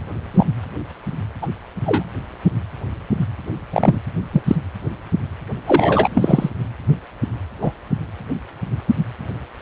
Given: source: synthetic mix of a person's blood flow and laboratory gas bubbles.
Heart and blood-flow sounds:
Doppler ultrasound of blood flow; precordium
0.34-0.46 s: bubbles
1.42-1.47 s: bubbles
1.85-2.04 s: bubbles
3.73-3.99 s: bubbles
4.33-4.42 s: bubbles
4.47-4.56 s: bubbles
5.67-6.50 s: bubbles
7.62-7.72 s: bubbles
From the record:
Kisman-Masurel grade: 123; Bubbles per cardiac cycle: 1 to 2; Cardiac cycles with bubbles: 10 to 50%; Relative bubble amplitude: loud (0.450 to 0.775); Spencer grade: 2 (many but less than half of the cardiac periods contain bubble signals, singularly or in groups); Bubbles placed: anywhere in the cardiac cycle

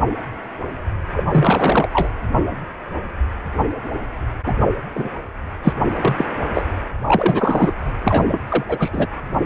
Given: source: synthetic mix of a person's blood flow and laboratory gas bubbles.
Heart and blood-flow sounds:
Doppler ultrasound of blood flow; precordium
1.12-1.24 s: bubbles
1.30-1.89 s: bubbles
1.93-2.09 s: bubbles
4.46-4.53 s: bubbles
4.60-4.67 s: bubbles
4.95-5.08 s: bubbles
5.63-5.73 s: bubbles
5.96-6.25 s: bubbles
6.54-6.62 s: bubbles
7.06-7.73 s: bubbles
8.04-8.38 s: bubbles
8.48-8.64 s: bubbles
8.67-9.07 s: bubbles
From the record:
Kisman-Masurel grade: 233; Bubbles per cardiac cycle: several, 3 to 8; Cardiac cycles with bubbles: 50 to 99%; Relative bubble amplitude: loud (0.450 to 0.775); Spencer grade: 3 (all of the cardiac periods contain showers or single bubble signals, but not dominating or overriding the cardiac motion signals); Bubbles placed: anywhere in the cardiac cycle

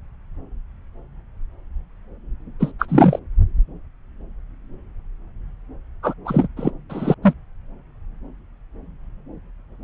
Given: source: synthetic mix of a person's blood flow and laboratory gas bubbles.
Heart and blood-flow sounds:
Doppler ultrasound of blood flow; subclavian vein
2.60-2.72 s: bubbles
2.79-3.19 s: bubbles
6.02-6.14 s: bubbles
6.25-6.48 s: bubbles
6.56-6.71 s: bubbles
6.89-7.14 s: bubbles
7.22-7.34 s: bubbles
From the record:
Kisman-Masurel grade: 223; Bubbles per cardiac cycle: several, 3 to 8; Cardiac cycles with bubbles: 10 to 50%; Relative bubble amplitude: loud (0.450 to 0.775); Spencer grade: 2 (many but less than half of the cardiac periods contain bubble signals, singularly or in groups); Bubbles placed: anywhere in the cardiac cycle

